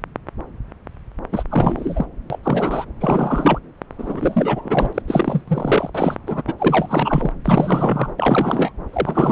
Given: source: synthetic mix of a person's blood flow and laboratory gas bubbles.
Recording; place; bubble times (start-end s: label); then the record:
Doppler ultrasound of blood flow; subclavian vein
1.32-1.44 s: bubbles
1.49-2.06 s: bubbles
2.30-2.39 s: bubbles
2.43-2.85 s: bubbles
3.00-3.59 s: bubbles
3.98-5.02 s: bubbles
5.08-5.44 s: bubbles
5.47-5.90 s: bubbles
5.94-6.15 s: bubbles
6.26-6.42 s: bubbles
6.47-6.54 s: bubbles
6.58-7.31 s: bubbles
7.44-8.12 s: bubbles
8.19-8.72 s: bubbles
8.93-9.32 s: bubbles
From the record:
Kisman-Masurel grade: 333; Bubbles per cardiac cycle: rolling drumbeat, 9 or more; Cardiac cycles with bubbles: 50 to 99%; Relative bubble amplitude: loud (0.450 to 0.775); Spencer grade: 3 (all of the cardiac periods contain showers or single bubble signals, but not dominating or overriding the cardiac motion signals); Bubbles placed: anywhere in the cardiac cycle